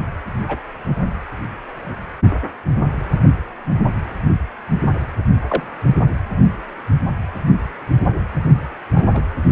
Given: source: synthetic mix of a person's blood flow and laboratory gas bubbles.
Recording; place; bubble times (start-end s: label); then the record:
Doppler ultrasound of blood flow; precordium
0.48-0.60 s: bubbles
5.48-5.63 s: bubbles
8.93-9.22 s: bubbles
From the record:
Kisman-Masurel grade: 122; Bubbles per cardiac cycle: 1 to 2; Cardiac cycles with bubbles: 10 to 50%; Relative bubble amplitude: moderate (0.250 to 0.450); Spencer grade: 2 (many but less than half of the cardiac periods contain bubble signals, singularly or in groups); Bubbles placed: only in the low amplitude regions of the cardiac cycle